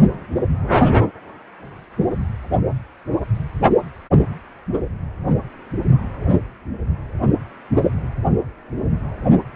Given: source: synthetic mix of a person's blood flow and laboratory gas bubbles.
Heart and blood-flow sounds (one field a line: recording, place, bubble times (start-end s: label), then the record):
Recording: Doppler ultrasound of blood flow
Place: precordium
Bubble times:
no bubbles
From the record:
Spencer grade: 0 (complete lack of bubble signals)